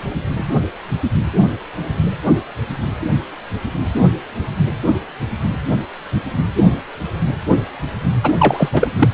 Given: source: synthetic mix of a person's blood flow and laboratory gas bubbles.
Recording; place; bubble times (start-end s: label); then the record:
Doppler ultrasound of blood flow; precordium
8.23-8.32 s: bubbles
8.39-8.68 s: bubbles
8.72-8.90 s: bubbles
8.99-9.08 s: bubbles
From the record:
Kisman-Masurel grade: 213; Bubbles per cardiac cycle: several, 3 to 8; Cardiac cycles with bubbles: 1 to 10%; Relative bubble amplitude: loud (0.450 to 0.775); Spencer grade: 1 (occasional bubble signal discernible with the cardiac motion signal, with majority of cardiac periods free of bubbles); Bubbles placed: anywhere in the cardiac cycle